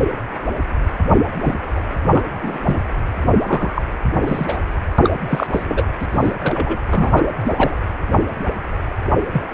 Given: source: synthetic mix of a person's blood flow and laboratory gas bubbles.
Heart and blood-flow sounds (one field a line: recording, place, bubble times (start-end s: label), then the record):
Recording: Doppler ultrasound of blood flow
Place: precordium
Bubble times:
1.08-1.17 s: bubbles
1.41-1.58 s: bubbles
1.67-1.80 s: bubbles
2.08-2.24 s: bubbles
2.43-2.58 s: bubbles
2.64-2.80 s: bubbles
3.43-3.82 s: bubbles
4.21-4.58 s: bubbles
5.04-5.15 s: bubbles
5.27-5.64 s: bubbles
5.67-5.85 s: bubbles
5.99-6.06 s: bubbles
6.11-6.34 s: bubbles
6.43-6.78 s: bubbles
6.90-7.29 s: bubbles
7.39-7.79 s: bubbles
9.32-9.48 s: bubbles
From the record:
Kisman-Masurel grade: 232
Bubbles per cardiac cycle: several, 3 to 8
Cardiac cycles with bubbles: 50 to 99%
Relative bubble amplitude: moderate (0.250 to 0.450)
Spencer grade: 3 (all of the cardiac periods contain showers or single bubble signals, but not dominating or overriding the cardiac motion signals)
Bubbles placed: anywhere in the cardiac cycle